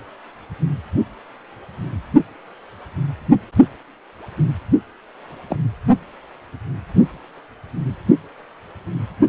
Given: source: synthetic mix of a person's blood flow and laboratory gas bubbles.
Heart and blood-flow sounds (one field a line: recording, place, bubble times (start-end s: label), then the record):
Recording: Doppler ultrasound of blood flow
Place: precordium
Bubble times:
5.50-5.57 s: bubbles
From the record:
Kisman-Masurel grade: 122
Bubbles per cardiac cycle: 1 to 2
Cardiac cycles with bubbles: 10 to 50%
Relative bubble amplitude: moderate (0.250 to 0.450)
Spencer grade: 2 (many but less than half of the cardiac periods contain bubble signals, singularly or in groups)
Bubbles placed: only in the low amplitude regions of the cardiac cycle